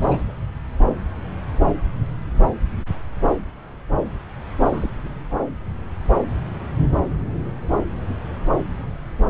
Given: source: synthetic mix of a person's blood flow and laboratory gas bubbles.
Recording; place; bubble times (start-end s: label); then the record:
Doppler ultrasound of blood flow; subclavian vein
0.00-0.33 s: bubbles
4.64-4.91 s: bubbles
4.94-5.12 s: bubbles
From the record:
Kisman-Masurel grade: 221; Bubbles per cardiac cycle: several, 3 to 8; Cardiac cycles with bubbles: 10 to 50%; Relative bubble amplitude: barely perceptible (0.100 to 0.250); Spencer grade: 2 (many but less than half of the cardiac periods contain bubble signals, singularly or in groups); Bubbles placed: anywhere in the cardiac cycle